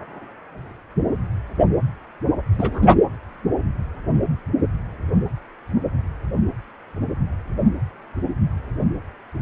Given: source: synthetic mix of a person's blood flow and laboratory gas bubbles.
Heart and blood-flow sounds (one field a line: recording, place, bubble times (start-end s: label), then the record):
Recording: Doppler ultrasound of blood flow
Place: precordium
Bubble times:
2.58-2.96 s: bubbles
From the record:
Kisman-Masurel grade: 212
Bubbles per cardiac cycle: several, 3 to 8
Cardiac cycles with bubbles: 1 to 10%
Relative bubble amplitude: moderate (0.250 to 0.450)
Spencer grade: 1 (occasional bubble signal discernible with the cardiac motion signal, with majority of cardiac periods free of bubbles)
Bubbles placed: anywhere in the cardiac cycle